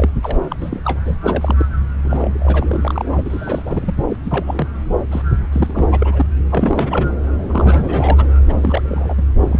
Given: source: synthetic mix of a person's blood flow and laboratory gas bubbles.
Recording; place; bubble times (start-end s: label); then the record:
Doppler ultrasound of blood flow; subclavian vein
0.00-0.10 s: bubbles
0.23-0.41 s: bubbles
0.48-0.56 s: bubbles
0.60-0.80 s: bubbles
0.84-1.00 s: bubbles
1.05-1.16 s: bubbles
1.24-1.66 s: bubbles
2.04-3.22 s: bubbles
3.25-3.62 s: bubbles
3.65-3.94 s: bubbles
3.97-4.04 s: bubbles
4.08-4.17 s: bubbles
4.23-4.68 s: bubbles
5.11-5.22 s: bubbles
5.52-5.88 s: bubbles
5.91-6.25 s: bubbles
6.50-7.12 s: bubbles
7.49-8.25 s: bubbles
8.48-9.14 s: bubbles
9.17-9.22 s: bubbles
9.47-9.60 s: bubbles
From the record:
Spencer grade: 3 (all of the cardiac periods contain showers or single bubble signals, but not dominating or overriding the cardiac motion signals); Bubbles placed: anywhere in the cardiac cycle